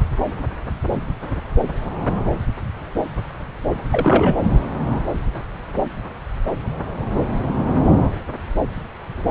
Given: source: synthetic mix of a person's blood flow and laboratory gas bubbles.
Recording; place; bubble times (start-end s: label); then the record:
Doppler ultrasound of blood flow; subclavian vein
3.91-4.47 s: bubbles
From the record:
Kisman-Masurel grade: 212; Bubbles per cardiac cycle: several, 3 to 8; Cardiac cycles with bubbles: 1 to 10%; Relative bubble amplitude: moderate (0.250 to 0.450); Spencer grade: 1 (occasional bubble signal discernible with the cardiac motion signal, with majority of cardiac periods free of bubbles); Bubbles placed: anywhere in the cardiac cycle